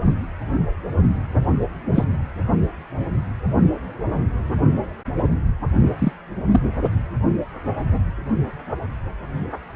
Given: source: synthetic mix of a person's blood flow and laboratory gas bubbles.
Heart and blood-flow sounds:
Doppler ultrasound of blood flow; precordium
1.95-2.04 s: bubbles
5.99-6.12 s: bubbles
6.51-6.59 s: bubbles
From the record:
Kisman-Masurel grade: 123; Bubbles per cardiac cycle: 1 to 2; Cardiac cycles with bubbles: 10 to 50%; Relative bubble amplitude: loud (0.450 to 0.775); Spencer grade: 2 (many but less than half of the cardiac periods contain bubble signals, singularly or in groups); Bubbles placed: only in the low amplitude regions of the cardiac cycle

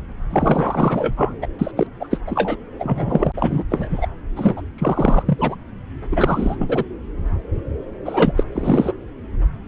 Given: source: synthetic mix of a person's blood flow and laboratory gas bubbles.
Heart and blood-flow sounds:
Doppler ultrasound of blood flow; subclavian vein
0.29-1.33 s: bubbles
1.42-1.47 s: bubbles
1.59-1.72 s: bubbles
1.76-1.87 s: bubbles
2.00-2.08 s: bubbles
2.10-2.18 s: bubbles
2.27-2.57 s: bubbles
2.79-3.32 s: bubbles
3.37-3.63 s: bubbles
3.70-4.07 s: bubbles
4.35-4.61 s: bubbles
4.78-5.23 s: bubbles
5.26-5.56 s: bubbles
6.12-6.84 s: bubbles
8.05-8.33 s: bubbles
8.37-8.44 s: bubbles
8.54-8.93 s: bubbles
From the record:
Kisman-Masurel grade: 333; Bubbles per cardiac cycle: rolling drumbeat, 9 or more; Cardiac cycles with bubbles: 50 to 99%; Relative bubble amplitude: loud (0.450 to 0.775); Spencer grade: 3 (all of the cardiac periods contain showers or single bubble signals, but not dominating or overriding the cardiac motion signals); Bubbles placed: anywhere in the cardiac cycle

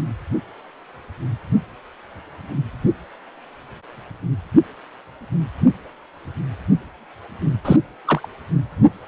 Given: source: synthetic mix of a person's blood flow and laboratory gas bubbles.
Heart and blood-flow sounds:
Doppler ultrasound of blood flow; precordium
7.65-7.76 s: bubbles
8.04-8.28 s: bubbles
From the record:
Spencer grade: 1 (occasional bubble signal discernible with the cardiac motion signal, with majority of cardiac periods free of bubbles); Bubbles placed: anywhere in the cardiac cycle

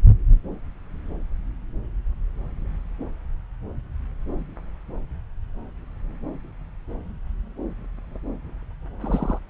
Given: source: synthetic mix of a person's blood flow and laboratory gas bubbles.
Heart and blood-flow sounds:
Doppler ultrasound of blood flow; subclavian vein
9.01-9.38 s: bubbles
From the record:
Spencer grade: 1 (occasional bubble signal discernible with the cardiac motion signal, with majority of cardiac periods free of bubbles); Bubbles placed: anywhere in the cardiac cycle

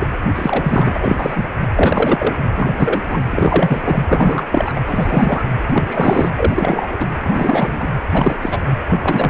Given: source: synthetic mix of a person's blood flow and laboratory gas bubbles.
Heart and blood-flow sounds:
Doppler ultrasound of blood flow; precordium
0.00-0.07 s: bubbles
0.35-1.46 s: bubbles
1.76-2.37 s: bubbles
2.56-2.72 s: bubbles
2.78-3.02 s: bubbles
3.08-3.24 s: bubbles
3.30-4.04 s: bubbles
4.08-4.46 s: bubbles
4.52-4.81 s: bubbles
4.87-5.44 s: bubbles
5.72-6.30 s: bubbles
6.36-7.06 s: bubbles
7.23-7.89 s: bubbles
8.12-8.36 s: bubbles
8.41-8.58 s: bubbles
8.89-9.30 s: bubbles
From the record:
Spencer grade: 3 (all of the cardiac periods contain showers or single bubble signals, but not dominating or overriding the cardiac motion signals); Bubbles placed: anywhere in the cardiac cycle

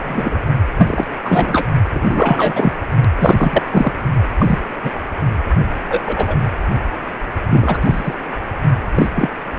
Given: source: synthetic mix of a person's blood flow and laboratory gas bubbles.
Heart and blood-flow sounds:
Doppler ultrasound of blood flow; precordium
0.00-0.40 s: bubbles
0.76-1.05 s: bubbles
1.25-1.67 s: bubbles
1.92-2.71 s: bubbles
3.19-3.62 s: bubbles
3.70-3.93 s: bubbles
4.38-4.58 s: bubbles
4.83-4.91 s: bubbles
5.89-6.01 s: bubbles
6.06-6.42 s: bubbles
7.50-8.14 s: bubbles
8.95-9.10 s: bubbles
9.15-9.30 s: bubbles
From the record:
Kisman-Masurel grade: 243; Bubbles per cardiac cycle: several, 3 to 8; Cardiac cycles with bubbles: 100%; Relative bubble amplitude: loud (0.450 to 0.775); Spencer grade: 3 (all of the cardiac periods contain showers or single bubble signals, but not dominating or overriding the cardiac motion signals); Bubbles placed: only in the low amplitude regions of the cardiac cycle

